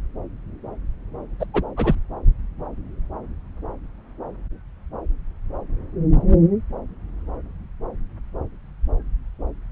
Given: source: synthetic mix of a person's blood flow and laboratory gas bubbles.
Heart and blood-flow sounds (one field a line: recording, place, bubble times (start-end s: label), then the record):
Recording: Doppler ultrasound of blood flow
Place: subclavian vein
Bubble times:
1.40-1.47 s: bubbles
1.54-1.62 s: bubbles
1.77-1.95 s: bubbles
From the record:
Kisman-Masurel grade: 213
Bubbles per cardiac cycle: several, 3 to 8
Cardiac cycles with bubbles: 1 to 10%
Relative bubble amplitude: loud (0.450 to 0.775)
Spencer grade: 1 (occasional bubble signal discernible with the cardiac motion signal, with majority of cardiac periods free of bubbles)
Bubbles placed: anywhere in the cardiac cycle